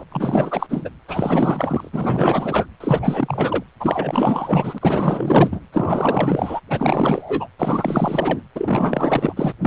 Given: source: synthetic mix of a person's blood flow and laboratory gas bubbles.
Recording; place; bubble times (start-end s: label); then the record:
Doppler ultrasound of blood flow; precordium
0.00-0.03 s: bubbles
0.12-0.67 s: bubbles
0.69-0.90 s: bubbles
1.08-1.90 s: bubbles
1.93-2.66 s: bubbles
2.80-3.64 s: bubbles
3.80-4.79 s: bubbles
4.81-5.61 s: bubbles
5.72-6.60 s: bubbles
6.70-7.48 s: bubbles
7.58-8.42 s: bubbles
8.55-9.34 s: bubbles
9.36-9.53 s: bubbles
9.61-9.67 s: bubbles
From the record:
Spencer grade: 4 (maximum detectable bubble signal sounding continuously throughout systole and diastole of every cardiac period, and overriding the amplitude of the normal cardiac signals); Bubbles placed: anywhere in the cardiac cycle